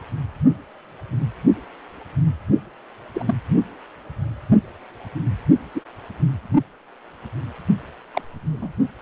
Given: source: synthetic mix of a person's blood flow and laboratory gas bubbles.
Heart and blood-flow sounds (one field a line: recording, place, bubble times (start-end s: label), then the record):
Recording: Doppler ultrasound of blood flow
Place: precordium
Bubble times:
3.14-3.35 s: bubbles
5.75-5.81 s: bubbles
8.13-8.21 s: bubbles
8.52-8.69 s: bubbles
From the record:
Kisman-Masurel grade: 122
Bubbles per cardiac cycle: 1 to 2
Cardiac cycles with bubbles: 10 to 50%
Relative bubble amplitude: moderate (0.250 to 0.450)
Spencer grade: 2 (many but less than half of the cardiac periods contain bubble signals, singularly or in groups)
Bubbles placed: only in the low amplitude regions of the cardiac cycle